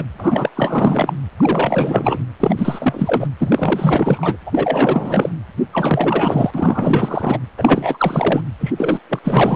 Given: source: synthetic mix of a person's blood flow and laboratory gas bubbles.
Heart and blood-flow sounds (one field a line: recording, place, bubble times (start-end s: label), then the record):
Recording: Doppler ultrasound of blood flow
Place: precordium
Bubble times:
0.00-0.04 s: bubbles
0.18-0.49 s: bubbles
0.56-1.14 s: bubbles
1.36-2.25 s: bubbles
2.40-3.28 s: bubbles
3.40-4.37 s: bubbles
4.46-5.29 s: bubbles
5.73-6.50 s: bubbles
6.54-7.40 s: bubbles
7.57-8.43 s: bubbles
8.60-8.73 s: bubbles
8.77-9.00 s: bubbles
9.09-9.19 s: bubbles
9.23-9.56 s: bubbles
From the record:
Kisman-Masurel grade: 444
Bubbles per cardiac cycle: continuous sound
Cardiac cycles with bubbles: 100%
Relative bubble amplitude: maximal (0.775 to 0.999)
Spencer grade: 4 (maximum detectable bubble signal sounding continuously throughout systole and diastole of every cardiac period, and overriding the amplitude of the normal cardiac signals)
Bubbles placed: anywhere in the cardiac cycle